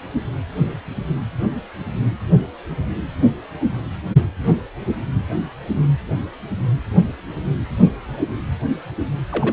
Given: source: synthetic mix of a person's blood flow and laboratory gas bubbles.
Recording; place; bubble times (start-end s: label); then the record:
Doppler ultrasound of blood flow; precordium
9.29-9.53 s: bubbles
From the record:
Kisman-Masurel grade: 112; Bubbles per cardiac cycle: 1 to 2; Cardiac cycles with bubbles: 1 to 10%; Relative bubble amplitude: moderate (0.250 to 0.450); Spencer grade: 1 (occasional bubble signal discernible with the cardiac motion signal, with majority of cardiac periods free of bubbles); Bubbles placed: anywhere in the cardiac cycle